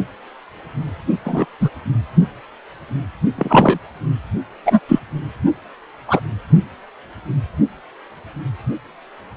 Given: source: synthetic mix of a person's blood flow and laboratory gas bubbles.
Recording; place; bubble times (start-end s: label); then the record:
Doppler ultrasound of blood flow; precordium
1.25-1.46 s: bubbles
1.60-1.69 s: bubbles
3.38-3.78 s: bubbles
4.65-4.79 s: bubbles
4.88-5.00 s: bubbles
6.08-6.20 s: bubbles
From the record:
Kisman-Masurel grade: 123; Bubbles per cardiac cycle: 1 to 2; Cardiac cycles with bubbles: 10 to 50%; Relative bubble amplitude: loud (0.450 to 0.775); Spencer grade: 2 (many but less than half of the cardiac periods contain bubble signals, singularly or in groups); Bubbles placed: only in the low amplitude regions of the cardiac cycle